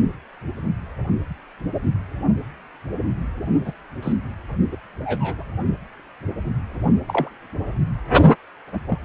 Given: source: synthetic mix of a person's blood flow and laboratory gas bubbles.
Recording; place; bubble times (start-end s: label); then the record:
Doppler ultrasound of blood flow; precordium
3.65-3.73 s: bubbles
4.02-4.12 s: bubbles
4.71-4.77 s: bubbles
4.99-5.43 s: bubbles
7.07-7.29 s: bubbles
8.87-8.98 s: bubbles
From the record:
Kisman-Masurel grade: 121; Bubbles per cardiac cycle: 1 to 2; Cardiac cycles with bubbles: 10 to 50%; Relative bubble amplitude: barely perceptible (0.100 to 0.250); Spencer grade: 2 (many but less than half of the cardiac periods contain bubble signals, singularly or in groups); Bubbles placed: only in the low amplitude regions of the cardiac cycle